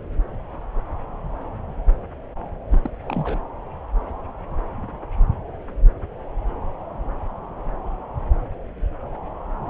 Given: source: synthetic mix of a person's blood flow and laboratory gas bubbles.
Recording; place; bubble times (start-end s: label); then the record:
Doppler ultrasound of blood flow; subclavian vein
2.71-2.79 s: bubbles
2.82-2.90 s: bubbles
3.05-3.40 s: bubbles
From the record:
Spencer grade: 2 (many but less than half of the cardiac periods contain bubble signals, singularly or in groups); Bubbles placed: anywhere in the cardiac cycle